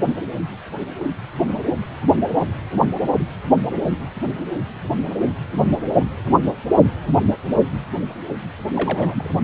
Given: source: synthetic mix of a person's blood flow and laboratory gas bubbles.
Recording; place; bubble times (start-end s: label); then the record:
Doppler ultrasound of blood flow; precordium
8.75-9.32 s: bubbles
9.38-9.44 s: bubbles
From the record:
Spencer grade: 2 (many but less than half of the cardiac periods contain bubble signals, singularly or in groups); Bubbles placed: anywhere in the cardiac cycle